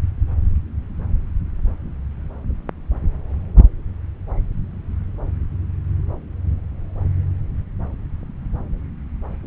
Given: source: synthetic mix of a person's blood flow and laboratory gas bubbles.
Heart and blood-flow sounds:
Doppler ultrasound of blood flow; subclavian vein
no bubbles
From the record:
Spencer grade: 0 (complete lack of bubble signals)

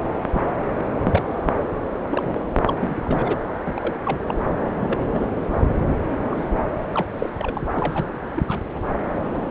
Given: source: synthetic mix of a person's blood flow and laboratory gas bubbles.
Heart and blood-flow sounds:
Doppler ultrasound of blood flow; subclavian vein
0.33-0.54 s: bubbles
0.78-0.84 s: bubbles
1.03-1.23 s: bubbles
2.10-2.40 s: bubbles
2.67-2.74 s: bubbles
2.79-3.38 s: bubbles
3.65-3.96 s: bubbles
4.05-4.18 s: bubbles
4.27-4.45 s: bubbles
4.50-4.58 s: bubbles
4.80-5.25 s: bubbles
5.89-5.96 s: bubbles
6.21-6.48 s: bubbles
6.92-7.02 s: bubbles
7.19-7.29 s: bubbles
7.39-7.67 s: bubbles
7.73-8.06 s: bubbles
8.34-8.43 s: bubbles
8.47-8.60 s: bubbles
8.74-8.80 s: bubbles
9.13-9.19 s: bubbles
9.32-9.42 s: bubbles
From the record:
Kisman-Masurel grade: 242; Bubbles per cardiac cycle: several, 3 to 8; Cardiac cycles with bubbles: 100%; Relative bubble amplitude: moderate (0.250 to 0.450); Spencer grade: 3 (all of the cardiac periods contain showers or single bubble signals, but not dominating or overriding the cardiac motion signals); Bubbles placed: anywhere in the cardiac cycle

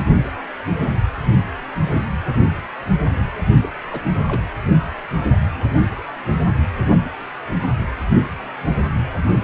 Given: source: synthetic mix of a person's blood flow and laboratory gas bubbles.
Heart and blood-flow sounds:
Doppler ultrasound of blood flow; precordium
3.60-3.69 s: bubbles
3.91-4.00 s: bubbles
4.27-4.42 s: bubbles
From the record:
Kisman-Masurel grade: 211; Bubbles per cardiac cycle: several, 3 to 8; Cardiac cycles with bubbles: 1 to 10%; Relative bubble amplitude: barely perceptible (0.100 to 0.250); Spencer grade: 1 (occasional bubble signal discernible with the cardiac motion signal, with majority of cardiac periods free of bubbles); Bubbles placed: anywhere in the cardiac cycle

